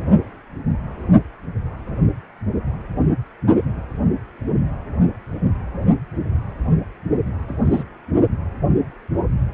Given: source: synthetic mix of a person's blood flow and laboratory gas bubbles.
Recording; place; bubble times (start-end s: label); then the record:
Doppler ultrasound of blood flow; precordium
7.48-7.83 s: bubbles
From the record:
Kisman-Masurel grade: 112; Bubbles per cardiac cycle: 1 to 2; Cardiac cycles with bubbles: 1 to 10%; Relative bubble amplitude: moderate (0.250 to 0.450); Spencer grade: 1 (occasional bubble signal discernible with the cardiac motion signal, with majority of cardiac periods free of bubbles); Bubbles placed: only in the low amplitude regions of the cardiac cycle